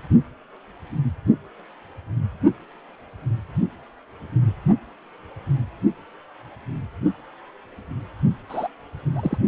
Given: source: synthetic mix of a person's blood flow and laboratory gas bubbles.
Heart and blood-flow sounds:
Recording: Doppler ultrasound of blood flow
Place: precordium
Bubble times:
8.49-8.67 s: bubbles
9.15-9.38 s: bubbles
From the record:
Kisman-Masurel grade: 112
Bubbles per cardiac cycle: 1 to 2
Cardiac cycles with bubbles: 1 to 10%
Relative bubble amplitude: moderate (0.250 to 0.450)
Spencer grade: 1 (occasional bubble signal discernible with the cardiac motion signal, with majority of cardiac periods free of bubbles)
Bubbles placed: only in the low amplitude regions of the cardiac cycle

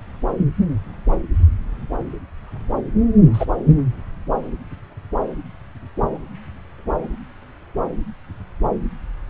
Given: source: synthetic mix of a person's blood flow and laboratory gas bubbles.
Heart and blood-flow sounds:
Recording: Doppler ultrasound of blood flow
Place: subclavian vein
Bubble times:
3.33-3.46 s: bubbles
From the record:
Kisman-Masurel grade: 122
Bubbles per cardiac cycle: 1 to 2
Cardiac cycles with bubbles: 10 to 50%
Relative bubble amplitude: moderate (0.250 to 0.450)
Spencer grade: 2 (many but less than half of the cardiac periods contain bubble signals, singularly or in groups)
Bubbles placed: anywhere in the cardiac cycle

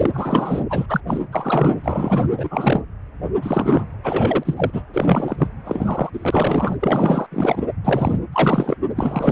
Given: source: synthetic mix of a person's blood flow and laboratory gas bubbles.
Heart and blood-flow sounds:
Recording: Doppler ultrasound of blood flow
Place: precordium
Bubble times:
0.00-0.11 s: bubbles
0.14-0.65 s: bubbles
0.70-0.86 s: bubbles
0.89-1.01 s: bubbles
1.07-1.23 s: bubbles
1.32-1.75 s: bubbles
1.83-2.29 s: bubbles
2.38-2.81 s: bubbles
3.24-3.29 s: bubbles
3.42-3.85 s: bubbles
4.03-4.82 s: bubbles
4.93-5.47 s: bubbles
5.64-6.10 s: bubbles
6.13-6.76 s: bubbles
6.80-7.26 s: bubbles
7.31-7.63 s: bubbles
7.84-8.19 s: bubbles
8.32-8.77 s: bubbles
8.96-9.32 s: bubbles
From the record:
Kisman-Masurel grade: 343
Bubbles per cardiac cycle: rolling drumbeat, 9 or more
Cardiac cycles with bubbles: 100%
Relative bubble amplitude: loud (0.450 to 0.775)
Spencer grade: 3 (all of the cardiac periods contain showers or single bubble signals, but not dominating or overriding the cardiac motion signals)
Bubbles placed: anywhere in the cardiac cycle

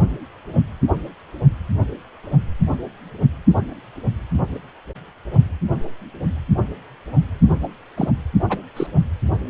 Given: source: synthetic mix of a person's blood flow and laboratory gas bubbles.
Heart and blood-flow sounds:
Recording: Doppler ultrasound of blood flow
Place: precordium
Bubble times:
7.62-7.68 s: bubbles
7.97-8.11 s: bubbles
8.50-8.58 s: bubbles
8.76-8.87 s: bubbles
From the record:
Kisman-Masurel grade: 212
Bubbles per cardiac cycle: several, 3 to 8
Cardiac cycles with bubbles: 1 to 10%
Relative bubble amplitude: moderate (0.250 to 0.450)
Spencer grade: 1 (occasional bubble signal discernible with the cardiac motion signal, with majority of cardiac periods free of bubbles)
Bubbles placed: only in the low amplitude regions of the cardiac cycle

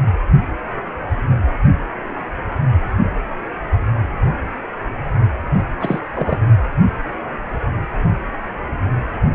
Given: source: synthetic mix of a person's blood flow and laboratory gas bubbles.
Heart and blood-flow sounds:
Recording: Doppler ultrasound of blood flow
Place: precordium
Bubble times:
5.80-6.00 s: bubbles
6.14-6.39 s: bubbles
From the record:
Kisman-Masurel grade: 213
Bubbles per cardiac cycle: several, 3 to 8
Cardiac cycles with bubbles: 1 to 10%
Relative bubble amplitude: loud (0.450 to 0.775)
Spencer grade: 1 (occasional bubble signal discernible with the cardiac motion signal, with majority of cardiac periods free of bubbles)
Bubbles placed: anywhere in the cardiac cycle

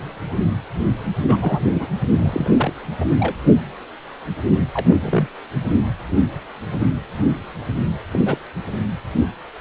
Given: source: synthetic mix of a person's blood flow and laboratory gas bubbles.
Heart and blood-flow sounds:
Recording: Doppler ultrasound of blood flow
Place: precordium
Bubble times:
1.27-1.37 s: bubbles
1.40-1.66 s: bubbles
1.74-1.88 s: bubbles
2.19-2.50 s: bubbles
2.58-2.73 s: bubbles
3.00-3.35 s: bubbles
4.73-4.85 s: bubbles
4.90-4.96 s: bubbles
5.00-5.27 s: bubbles
8.11-8.19 s: bubbles
8.26-8.38 s: bubbles
From the record:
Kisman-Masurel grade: 222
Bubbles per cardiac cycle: several, 3 to 8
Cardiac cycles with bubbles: 10 to 50%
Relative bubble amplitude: moderate (0.250 to 0.450)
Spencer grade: 2 (many but less than half of the cardiac periods contain bubble signals, singularly or in groups)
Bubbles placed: anywhere in the cardiac cycle

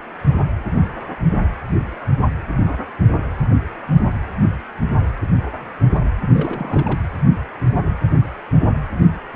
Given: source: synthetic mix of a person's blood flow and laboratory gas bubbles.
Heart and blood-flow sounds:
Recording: Doppler ultrasound of blood flow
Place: precordium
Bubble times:
6.33-6.99 s: bubbles
From the record:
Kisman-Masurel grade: 211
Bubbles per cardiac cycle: several, 3 to 8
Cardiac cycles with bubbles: 1 to 10%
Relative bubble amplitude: barely perceptible (0.100 to 0.250)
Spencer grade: 1 (occasional bubble signal discernible with the cardiac motion signal, with majority of cardiac periods free of bubbles)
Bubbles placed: anywhere in the cardiac cycle

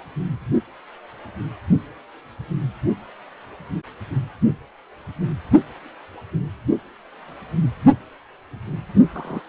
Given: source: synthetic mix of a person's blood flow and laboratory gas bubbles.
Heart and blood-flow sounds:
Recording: Doppler ultrasound of blood flow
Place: precordium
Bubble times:
9.13-9.40 s: bubbles
From the record:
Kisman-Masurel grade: 121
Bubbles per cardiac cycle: 1 to 2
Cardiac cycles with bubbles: 10 to 50%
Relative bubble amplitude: barely perceptible (0.100 to 0.250)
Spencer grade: 2 (many but less than half of the cardiac periods contain bubble signals, singularly or in groups)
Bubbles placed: only in the low amplitude regions of the cardiac cycle

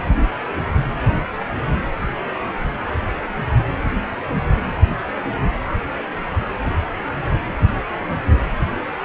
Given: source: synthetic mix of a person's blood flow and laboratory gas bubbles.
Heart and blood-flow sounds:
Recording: Doppler ultrasound of blood flow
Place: precordium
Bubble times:
no bubbles
From the record:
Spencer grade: 0 (complete lack of bubble signals)

